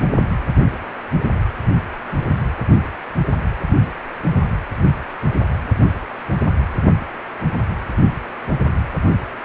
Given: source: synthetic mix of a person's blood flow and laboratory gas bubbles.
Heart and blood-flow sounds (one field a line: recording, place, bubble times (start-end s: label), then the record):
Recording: Doppler ultrasound of blood flow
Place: precordium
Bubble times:
no bubbles
From the record:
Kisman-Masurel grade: 000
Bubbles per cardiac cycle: 0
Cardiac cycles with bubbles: 0%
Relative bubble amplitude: no bubbles discernible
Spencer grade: 0 (complete lack of bubble signals)